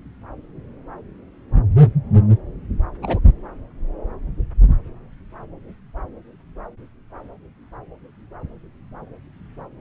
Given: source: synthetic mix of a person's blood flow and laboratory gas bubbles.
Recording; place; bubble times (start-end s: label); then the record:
Doppler ultrasound of blood flow; subclavian vein
3.02-3.20 s: bubbles
From the record:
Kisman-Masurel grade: 112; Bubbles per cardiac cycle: 1 to 2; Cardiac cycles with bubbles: 1 to 10%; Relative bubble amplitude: moderate (0.250 to 0.450); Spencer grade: 1 (occasional bubble signal discernible with the cardiac motion signal, with majority of cardiac periods free of bubbles); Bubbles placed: anywhere in the cardiac cycle